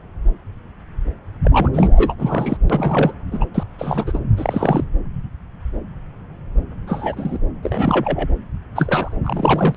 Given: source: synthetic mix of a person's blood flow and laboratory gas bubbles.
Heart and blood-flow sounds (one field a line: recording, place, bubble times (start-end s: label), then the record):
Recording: Doppler ultrasound of blood flow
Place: subclavian vein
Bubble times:
1.44-1.69 s: bubbles
1.73-2.15 s: bubbles
2.18-2.57 s: bubbles
2.70-3.12 s: bubbles
3.32-3.45 s: bubbles
3.54-3.64 s: bubbles
3.79-4.18 s: bubbles
4.37-4.84 s: bubbles
6.87-7.38 s: bubbles
7.63-8.28 s: bubbles
8.75-9.16 s: bubbles
9.25-9.75 s: bubbles
From the record:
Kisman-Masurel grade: 232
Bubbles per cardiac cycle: several, 3 to 8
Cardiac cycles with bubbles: 50 to 99%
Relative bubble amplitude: moderate (0.250 to 0.450)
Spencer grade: 3 (all of the cardiac periods contain showers or single bubble signals, but not dominating or overriding the cardiac motion signals)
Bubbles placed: anywhere in the cardiac cycle